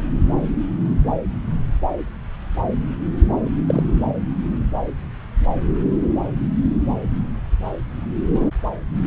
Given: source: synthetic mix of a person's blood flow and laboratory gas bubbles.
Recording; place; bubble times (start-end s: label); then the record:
Doppler ultrasound of blood flow; subclavian vein
3.67-3.83 s: bubbles
From the record:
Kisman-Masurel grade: 112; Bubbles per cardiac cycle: 1 to 2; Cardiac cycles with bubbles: 1 to 10%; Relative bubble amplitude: moderate (0.250 to 0.450); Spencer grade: 1 (occasional bubble signal discernible with the cardiac motion signal, with majority of cardiac periods free of bubbles); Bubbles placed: anywhere in the cardiac cycle